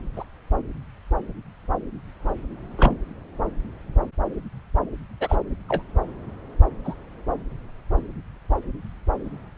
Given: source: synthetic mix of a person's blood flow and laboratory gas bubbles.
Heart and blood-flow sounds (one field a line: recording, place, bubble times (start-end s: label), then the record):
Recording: Doppler ultrasound of blood flow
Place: subclavian vein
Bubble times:
0.15-0.24 s: bubbles
2.77-2.95 s: bubbles
5.20-5.35 s: bubbles
5.68-5.83 s: bubbles
6.84-6.94 s: bubbles
From the record:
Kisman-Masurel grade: 122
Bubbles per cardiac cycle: 1 to 2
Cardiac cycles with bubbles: 10 to 50%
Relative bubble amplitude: moderate (0.250 to 0.450)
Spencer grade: 2 (many but less than half of the cardiac periods contain bubble signals, singularly or in groups)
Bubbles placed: anywhere in the cardiac cycle